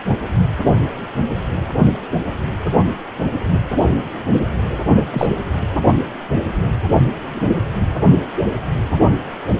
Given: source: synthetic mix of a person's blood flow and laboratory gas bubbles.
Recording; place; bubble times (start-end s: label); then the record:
Doppler ultrasound of blood flow; precordium
5.11-5.27 s: bubbles
From the record:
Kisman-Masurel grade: 113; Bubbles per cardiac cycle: 1 to 2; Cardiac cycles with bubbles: 1 to 10%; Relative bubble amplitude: loud (0.450 to 0.775); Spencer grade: 1 (occasional bubble signal discernible with the cardiac motion signal, with majority of cardiac periods free of bubbles); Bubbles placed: anywhere in the cardiac cycle